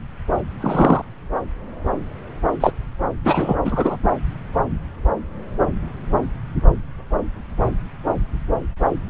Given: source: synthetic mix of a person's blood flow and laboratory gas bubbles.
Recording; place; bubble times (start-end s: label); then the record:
Doppler ultrasound of blood flow; subclavian vein
0.60-1.02 s: bubbles
2.60-2.71 s: bubbles
3.24-3.56 s: bubbles
3.64-3.97 s: bubbles
From the record:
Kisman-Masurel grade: 123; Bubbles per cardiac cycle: 1 to 2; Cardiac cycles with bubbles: 10 to 50%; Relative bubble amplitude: loud (0.450 to 0.775); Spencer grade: 2 (many but less than half of the cardiac periods contain bubble signals, singularly or in groups); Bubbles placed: anywhere in the cardiac cycle